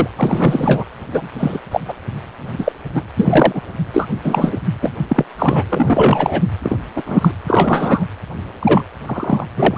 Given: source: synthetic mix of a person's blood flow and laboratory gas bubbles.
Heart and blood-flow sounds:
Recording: Doppler ultrasound of blood flow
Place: precordium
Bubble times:
0.00-0.08 s: bubbles
0.16-0.84 s: bubbles
1.11-1.29 s: bubbles
1.38-1.59 s: bubbles
1.71-1.81 s: bubbles
1.88-1.94 s: bubbles
2.58-2.72 s: bubbles
2.94-3.02 s: bubbles
3.16-3.61 s: bubbles
3.93-4.07 s: bubbles
4.23-4.58 s: bubbles
4.82-4.90 s: bubbles
5.09-5.24 s: bubbles
5.38-5.65 s: bubbles
5.68-6.42 s: bubbles
6.62-6.76 s: bubbles
6.96-7.03 s: bubbles
7.06-7.31 s: bubbles
7.47-8.05 s: bubbles
8.59-8.84 s: bubbles
9.06-9.46 s: bubbles
9.57-9.78 s: bubbles
From the record:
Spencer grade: 3 (all of the cardiac periods contain showers or single bubble signals, but not dominating or overriding the cardiac motion signals)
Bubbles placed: anywhere in the cardiac cycle

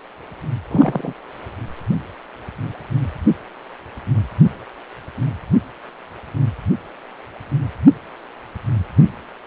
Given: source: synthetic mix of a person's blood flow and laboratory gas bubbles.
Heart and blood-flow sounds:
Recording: Doppler ultrasound of blood flow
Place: precordium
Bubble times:
0.71-1.13 s: bubbles
From the record:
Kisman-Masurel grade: 112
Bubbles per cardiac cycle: 1 to 2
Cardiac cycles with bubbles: 1 to 10%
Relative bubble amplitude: moderate (0.250 to 0.450)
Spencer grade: 1 (occasional bubble signal discernible with the cardiac motion signal, with majority of cardiac periods free of bubbles)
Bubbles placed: anywhere in the cardiac cycle

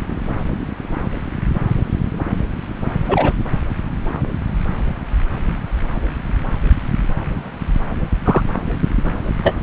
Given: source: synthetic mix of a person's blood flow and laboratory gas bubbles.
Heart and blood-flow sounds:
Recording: Doppler ultrasound of blood flow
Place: subclavian vein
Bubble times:
3.08-3.34 s: bubbles
8.25-8.41 s: bubbles
9.43-9.56 s: bubbles
From the record:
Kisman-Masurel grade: 123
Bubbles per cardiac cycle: 1 to 2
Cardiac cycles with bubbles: 10 to 50%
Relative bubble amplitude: loud (0.450 to 0.775)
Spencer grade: 2 (many but less than half of the cardiac periods contain bubble signals, singularly or in groups)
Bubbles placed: anywhere in the cardiac cycle

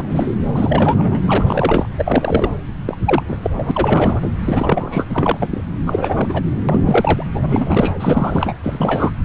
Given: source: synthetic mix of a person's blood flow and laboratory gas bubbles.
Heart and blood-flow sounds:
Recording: Doppler ultrasound of blood flow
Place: subclavian vein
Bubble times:
0.00-0.36 s: bubbles
0.53-1.21 s: bubbles
1.25-1.89 s: bubbles
1.98-2.50 s: bubbles
2.87-2.98 s: bubbles
3.06-3.23 s: bubbles
3.28-3.37 s: bubbles
3.42-3.50 s: bubbles
3.56-4.30 s: bubbles
4.45-5.04 s: bubbles
5.09-5.61 s: bubbles
5.86-6.42 s: bubbles
6.68-7.23 s: bubbles
7.33-7.95 s: bubbles
7.99-8.54 s: bubbles
8.63-9.11 s: bubbles
From the record:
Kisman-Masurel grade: 342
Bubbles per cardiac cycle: rolling drumbeat, 9 or more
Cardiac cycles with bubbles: 100%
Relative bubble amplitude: moderate (0.250 to 0.450)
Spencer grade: 3 (all of the cardiac periods contain showers or single bubble signals, but not dominating or overriding the cardiac motion signals)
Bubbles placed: anywhere in the cardiac cycle

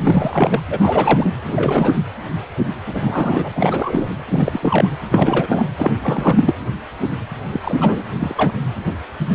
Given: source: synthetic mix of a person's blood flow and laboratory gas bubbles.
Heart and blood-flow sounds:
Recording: Doppler ultrasound of blood flow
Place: precordium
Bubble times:
0.00-0.60 s: bubbles
0.70-1.36 s: bubbles
1.48-2.00 s: bubbles
2.87-4.10 s: bubbles
4.28-4.59 s: bubbles
4.62-4.89 s: bubbles
5.11-5.64 s: bubbles
5.77-5.92 s: bubbles
5.96-6.54 s: bubbles
7.52-8.04 s: bubbles
8.20-8.51 s: bubbles
From the record:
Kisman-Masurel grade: 332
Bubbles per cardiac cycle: rolling drumbeat, 9 or more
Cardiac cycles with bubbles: 50 to 99%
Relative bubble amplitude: moderate (0.250 to 0.450)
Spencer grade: 3 (all of the cardiac periods contain showers or single bubble signals, but not dominating or overriding the cardiac motion signals)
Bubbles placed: anywhere in the cardiac cycle

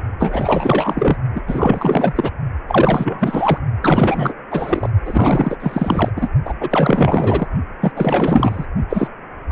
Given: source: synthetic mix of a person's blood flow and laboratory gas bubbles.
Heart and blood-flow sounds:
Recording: Doppler ultrasound of blood flow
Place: precordium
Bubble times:
0.19-1.18 s: bubbles
1.35-1.41 s: bubbles
1.47-2.30 s: bubbles
2.67-3.58 s: bubbles
3.83-4.34 s: bubbles
4.50-4.89 s: bubbles
5.05-5.57 s: bubbles
5.60-6.09 s: bubbles
6.16-6.29 s: bubbles
6.44-6.54 s: bubbles
6.60-7.46 s: bubbles
7.81-7.92 s: bubbles
7.95-8.66 s: bubbles
8.89-9.08 s: bubbles
9.50-9.52 s: bubbles
From the record:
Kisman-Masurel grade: 444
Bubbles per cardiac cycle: continuous sound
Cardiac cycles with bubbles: 100%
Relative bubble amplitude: maximal (0.775 to 0.999)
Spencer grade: 4 (maximum detectable bubble signal sounding continuously throughout systole and diastole of every cardiac period, and overriding the amplitude of the normal cardiac signals)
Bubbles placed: only in the low amplitude regions of the cardiac cycle

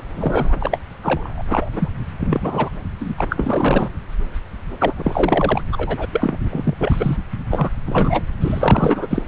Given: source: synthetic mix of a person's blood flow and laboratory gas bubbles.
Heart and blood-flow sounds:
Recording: Doppler ultrasound of blood flow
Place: subclavian vein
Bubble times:
0.15-0.79 s: bubbles
1.02-1.43 s: bubbles
1.49-1.70 s: bubbles
1.74-1.89 s: bubbles
2.20-2.70 s: bubbles
3.00-3.14 s: bubbles
3.17-3.89 s: bubbles
4.79-5.62 s: bubbles
5.72-6.06 s: bubbles
6.12-6.38 s: bubbles
6.50-6.74 s: bubbles
6.79-7.17 s: bubbles
7.50-7.70 s: bubbles
7.86-8.22 s: bubbles
8.40-9.07 s: bubbles
9.10-9.22 s: bubbles
From the record:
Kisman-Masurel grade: 343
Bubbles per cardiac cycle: rolling drumbeat, 9 or more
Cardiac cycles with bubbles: 100%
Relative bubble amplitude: loud (0.450 to 0.775)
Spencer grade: 3 (all of the cardiac periods contain showers or single bubble signals, but not dominating or overriding the cardiac motion signals)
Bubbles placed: anywhere in the cardiac cycle

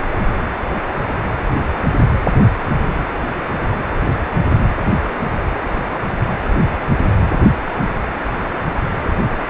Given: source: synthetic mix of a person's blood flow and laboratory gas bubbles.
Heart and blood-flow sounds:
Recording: Doppler ultrasound of blood flow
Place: precordium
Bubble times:
no bubbles
From the record:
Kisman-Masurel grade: 000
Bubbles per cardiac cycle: 0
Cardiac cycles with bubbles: 0%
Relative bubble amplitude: no bubbles discernible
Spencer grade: 0 (complete lack of bubble signals)

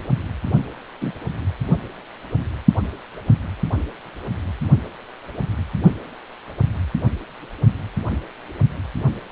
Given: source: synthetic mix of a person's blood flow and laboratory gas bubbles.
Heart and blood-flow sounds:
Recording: Doppler ultrasound of blood flow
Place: precordium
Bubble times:
1.01-1.12 s: bubbles
From the record:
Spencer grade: 2 (many but less than half of the cardiac periods contain bubble signals, singularly or in groups)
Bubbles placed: only in the low amplitude regions of the cardiac cycle

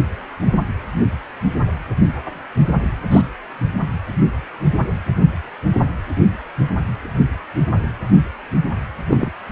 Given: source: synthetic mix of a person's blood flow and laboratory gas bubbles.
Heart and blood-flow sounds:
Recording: Doppler ultrasound of blood flow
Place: precordium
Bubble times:
3.12-3.21 s: bubbles
9.08-9.30 s: bubbles
From the record:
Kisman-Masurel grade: 123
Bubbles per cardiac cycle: 1 to 2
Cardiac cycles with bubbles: 10 to 50%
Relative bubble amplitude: loud (0.450 to 0.775)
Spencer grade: 2 (many but less than half of the cardiac periods contain bubble signals, singularly or in groups)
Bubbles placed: anywhere in the cardiac cycle

